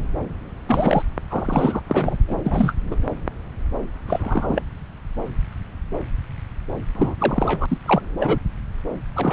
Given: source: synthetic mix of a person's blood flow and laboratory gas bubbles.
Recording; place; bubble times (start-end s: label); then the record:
Doppler ultrasound of blood flow; subclavian vein
0.67-1.03 s: bubbles
1.30-1.81 s: bubbles
1.88-2.17 s: bubbles
2.27-2.37 s: bubbles
2.46-2.73 s: bubbles
2.91-2.96 s: bubbles
4.08-4.62 s: bubbles
6.95-7.15 s: bubbles
7.18-7.78 s: bubbles
7.86-8.02 s: bubbles
8.20-8.39 s: bubbles
9.15-9.33 s: bubbles
From the record:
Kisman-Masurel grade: 232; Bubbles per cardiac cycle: several, 3 to 8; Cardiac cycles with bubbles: 50 to 99%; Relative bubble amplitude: moderate (0.250 to 0.450); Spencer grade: 3 (all of the cardiac periods contain showers or single bubble signals, but not dominating or overriding the cardiac motion signals); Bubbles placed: anywhere in the cardiac cycle